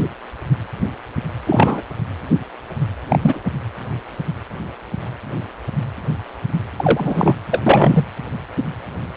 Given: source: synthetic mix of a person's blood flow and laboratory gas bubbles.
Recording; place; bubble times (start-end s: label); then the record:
Doppler ultrasound of blood flow; precordium
1.46-1.82 s: bubbles
3.08-3.19 s: bubbles
3.21-3.40 s: bubbles
6.76-7.36 s: bubbles
7.51-8.05 s: bubbles
From the record:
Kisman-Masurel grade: 223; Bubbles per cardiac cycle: several, 3 to 8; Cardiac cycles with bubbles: 10 to 50%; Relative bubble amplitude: loud (0.450 to 0.775); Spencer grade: 2 (many but less than half of the cardiac periods contain bubble signals, singularly or in groups); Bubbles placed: anywhere in the cardiac cycle